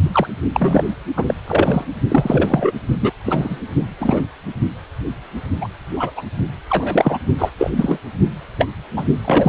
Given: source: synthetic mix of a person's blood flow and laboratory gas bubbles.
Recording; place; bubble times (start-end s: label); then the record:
Doppler ultrasound of blood flow; precordium
0.12-0.27 s: bubbles
0.52-0.84 s: bubbles
1.17-1.34 s: bubbles
1.47-1.85 s: bubbles
2.08-2.72 s: bubbles
3.01-3.12 s: bubbles
3.23-3.60 s: bubbles
4.00-4.25 s: bubbles
5.61-5.68 s: bubbles
5.96-6.11 s: bubbles
6.17-6.23 s: bubbles
6.70-7.18 s: bubbles
7.38-7.50 s: bubbles
7.58-7.71 s: bubbles
7.77-7.98 s: bubbles
8.58-8.67 s: bubbles
8.96-9.04 s: bubbles
9.24-9.49 s: bubbles
From the record:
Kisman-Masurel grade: 233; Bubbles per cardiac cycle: several, 3 to 8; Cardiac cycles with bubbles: 50 to 99%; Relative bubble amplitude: loud (0.450 to 0.775); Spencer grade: 3 (all of the cardiac periods contain showers or single bubble signals, but not dominating or overriding the cardiac motion signals); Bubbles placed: only in the low amplitude regions of the cardiac cycle